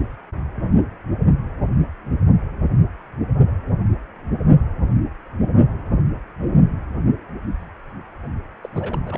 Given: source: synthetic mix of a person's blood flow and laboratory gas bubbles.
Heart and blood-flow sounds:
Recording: Doppler ultrasound of blood flow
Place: precordium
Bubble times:
8.64-8.70 s: bubbles
8.73-9.18 s: bubbles
From the record:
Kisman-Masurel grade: 211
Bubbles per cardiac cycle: several, 3 to 8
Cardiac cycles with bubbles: 1 to 10%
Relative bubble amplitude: barely perceptible (0.100 to 0.250)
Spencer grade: 1 (occasional bubble signal discernible with the cardiac motion signal, with majority of cardiac periods free of bubbles)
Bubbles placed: only in the low amplitude regions of the cardiac cycle

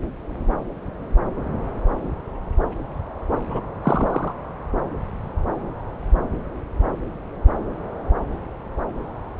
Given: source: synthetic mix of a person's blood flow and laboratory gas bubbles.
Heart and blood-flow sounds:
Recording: Doppler ultrasound of blood flow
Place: subclavian vein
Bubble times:
3.50-3.60 s: bubbles
3.82-4.33 s: bubbles
From the record:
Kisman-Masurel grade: 212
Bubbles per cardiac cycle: several, 3 to 8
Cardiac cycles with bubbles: 1 to 10%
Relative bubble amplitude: moderate (0.250 to 0.450)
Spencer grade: 1 (occasional bubble signal discernible with the cardiac motion signal, with majority of cardiac periods free of bubbles)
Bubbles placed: anywhere in the cardiac cycle

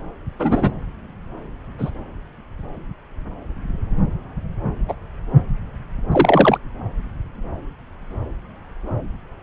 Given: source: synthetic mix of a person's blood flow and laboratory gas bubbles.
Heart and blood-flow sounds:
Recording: Doppler ultrasound of blood flow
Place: subclavian vein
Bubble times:
0.39-0.73 s: bubbles
1.78-1.91 s: bubbles
4.89-4.94 s: bubbles
6.12-6.58 s: bubbles
From the record:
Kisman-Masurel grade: 123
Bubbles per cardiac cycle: 1 to 2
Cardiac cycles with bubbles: 10 to 50%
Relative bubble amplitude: loud (0.450 to 0.775)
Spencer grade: 2 (many but less than half of the cardiac periods contain bubble signals, singularly or in groups)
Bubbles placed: anywhere in the cardiac cycle

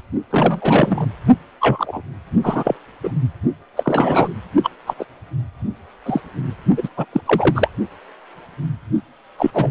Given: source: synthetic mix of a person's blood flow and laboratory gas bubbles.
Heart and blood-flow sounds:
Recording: Doppler ultrasound of blood flow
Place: precordium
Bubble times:
0.30-1.06 s: bubbles
1.60-2.01 s: bubbles
2.44-2.75 s: bubbles
3.03-3.12 s: bubbles
3.76-4.33 s: bubbles
4.64-4.70 s: bubbles
4.87-4.94 s: bubbles
4.99-5.04 s: bubbles
6.06-6.21 s: bubbles
6.77-6.89 s: bubbles
6.96-7.05 s: bubbles
7.13-7.21 s: bubbles
7.25-7.68 s: bubbles
9.38-9.51 s: bubbles
9.54-9.71 s: bubbles
From the record:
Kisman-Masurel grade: 233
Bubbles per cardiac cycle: several, 3 to 8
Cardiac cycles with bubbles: 50 to 99%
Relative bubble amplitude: loud (0.450 to 0.775)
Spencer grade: 3 (all of the cardiac periods contain showers or single bubble signals, but not dominating or overriding the cardiac motion signals)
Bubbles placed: only in the low amplitude regions of the cardiac cycle

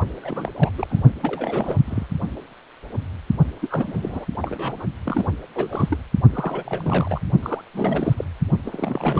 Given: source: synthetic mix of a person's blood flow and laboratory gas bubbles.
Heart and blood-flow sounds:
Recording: Doppler ultrasound of blood flow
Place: precordium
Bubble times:
0.21-0.52 s: bubbles
0.56-0.71 s: bubbles
0.77-0.87 s: bubbles
0.90-1.02 s: bubbles
1.21-1.77 s: bubbles
1.85-2.06 s: bubbles
3.60-4.26 s: bubbles
4.42-4.86 s: bubbles
5.05-5.27 s: bubbles
5.55-5.97 s: bubbles
6.33-7.21 s: bubbles
7.43-7.62 s: bubbles
7.73-8.14 s: bubbles
8.17-8.24 s: bubbles
8.63-9.20 s: bubbles
From the record:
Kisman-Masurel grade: 332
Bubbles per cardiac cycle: rolling drumbeat, 9 or more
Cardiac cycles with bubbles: 50 to 99%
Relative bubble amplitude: moderate (0.250 to 0.450)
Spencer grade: 3 (all of the cardiac periods contain showers or single bubble signals, but not dominating or overriding the cardiac motion signals)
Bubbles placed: only in the low amplitude regions of the cardiac cycle

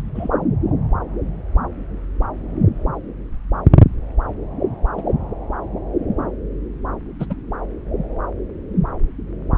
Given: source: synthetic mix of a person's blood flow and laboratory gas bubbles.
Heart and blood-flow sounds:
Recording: Doppler ultrasound of blood flow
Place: subclavian vein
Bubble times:
0.14-0.29 s: bubbles
4.97-5.03 s: bubbles
7.19-7.25 s: bubbles
7.29-7.34 s: bubbles
From the record:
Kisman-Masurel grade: 122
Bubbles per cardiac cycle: 1 to 2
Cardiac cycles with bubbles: 10 to 50%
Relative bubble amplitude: moderate (0.250 to 0.450)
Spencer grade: 2 (many but less than half of the cardiac periods contain bubble signals, singularly or in groups)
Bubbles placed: anywhere in the cardiac cycle

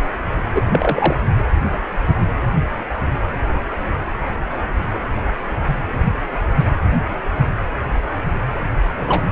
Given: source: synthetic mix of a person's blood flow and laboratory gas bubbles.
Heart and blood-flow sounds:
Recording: Doppler ultrasound of blood flow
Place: precordium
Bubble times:
0.54-0.62 s: bubbles
0.71-1.17 s: bubbles
8.96-9.24 s: bubbles
From the record:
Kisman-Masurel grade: 223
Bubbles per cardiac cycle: several, 3 to 8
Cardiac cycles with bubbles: 10 to 50%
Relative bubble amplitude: loud (0.450 to 0.775)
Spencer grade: 2 (many but less than half of the cardiac periods contain bubble signals, singularly or in groups)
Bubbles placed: anywhere in the cardiac cycle

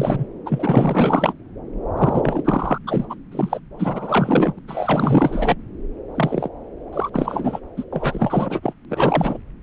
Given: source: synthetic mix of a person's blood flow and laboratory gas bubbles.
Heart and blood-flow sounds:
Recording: Doppler ultrasound of blood flow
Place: subclavian vein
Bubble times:
0.00-0.24 s: bubbles
0.45-1.33 s: bubbles
1.97-2.78 s: bubbles
2.87-3.15 s: bubbles
3.31-3.60 s: bubbles
3.78-4.54 s: bubbles
4.57-4.59 s: bubbles
4.67-5.55 s: bubbles
6.14-6.49 s: bubbles
6.92-7.60 s: bubbles
7.76-7.84 s: bubbles
7.92-8.74 s: bubbles
8.89-9.38 s: bubbles
From the record:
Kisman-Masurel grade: 444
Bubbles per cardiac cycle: continuous sound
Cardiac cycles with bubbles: 100%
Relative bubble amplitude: maximal (0.775 to 0.999)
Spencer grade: 4 (maximum detectable bubble signal sounding continuously throughout systole and diastole of every cardiac period, and overriding the amplitude of the normal cardiac signals)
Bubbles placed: anywhere in the cardiac cycle

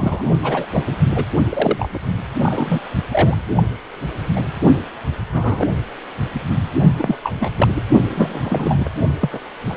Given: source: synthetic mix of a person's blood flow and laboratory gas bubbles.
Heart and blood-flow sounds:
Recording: Doppler ultrasound of blood flow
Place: precordium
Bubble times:
0.00-0.23 s: bubbles
0.42-0.66 s: bubbles
0.72-0.84 s: bubbles
0.87-0.96 s: bubbles
1.15-1.25 s: bubbles
1.49-1.89 s: bubbles
1.94-1.99 s: bubbles
2.42-2.80 s: bubbles
3.12-3.35 s: bubbles
3.55-3.63 s: bubbles
4.35-4.41 s: bubbles
5.32-5.67 s: bubbles
6.98-7.16 s: bubbles
7.24-7.31 s: bubbles
7.40-7.50 s: bubbles
7.57-7.83 s: bubbles
8.09-8.89 s: bubbles
9.20-9.30 s: bubbles
9.32-9.39 s: bubbles
9.68-9.77 s: bubbles
From the record:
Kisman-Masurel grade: 242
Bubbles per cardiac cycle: several, 3 to 8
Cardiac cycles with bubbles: 100%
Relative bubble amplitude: moderate (0.250 to 0.450)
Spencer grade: 3 (all of the cardiac periods contain showers or single bubble signals, but not dominating or overriding the cardiac motion signals)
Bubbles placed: only in the low amplitude regions of the cardiac cycle

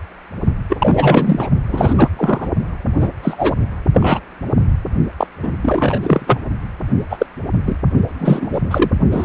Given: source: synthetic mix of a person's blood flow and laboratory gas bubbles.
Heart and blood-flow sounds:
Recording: Doppler ultrasound of blood flow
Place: precordium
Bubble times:
0.70-1.48 s: bubbles
1.68-1.94 s: bubbles
1.97-2.08 s: bubbles
2.17-2.48 s: bubbles
3.00-3.08 s: bubbles
3.22-3.53 s: bubbles
3.93-4.21 s: bubbles
5.18-5.27 s: bubbles
5.42-5.52 s: bubbles
5.62-6.39 s: bubbles
7.10-7.26 s: bubbles
7.65-7.75 s: bubbles
8.19-8.60 s: bubbles
8.71-8.89 s: bubbles
9.11-9.25 s: bubbles
From the record:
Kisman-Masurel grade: 233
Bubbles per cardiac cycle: several, 3 to 8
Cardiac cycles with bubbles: 50 to 99%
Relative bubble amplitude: loud (0.450 to 0.775)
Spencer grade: 3 (all of the cardiac periods contain showers or single bubble signals, but not dominating or overriding the cardiac motion signals)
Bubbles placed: only in the low amplitude regions of the cardiac cycle

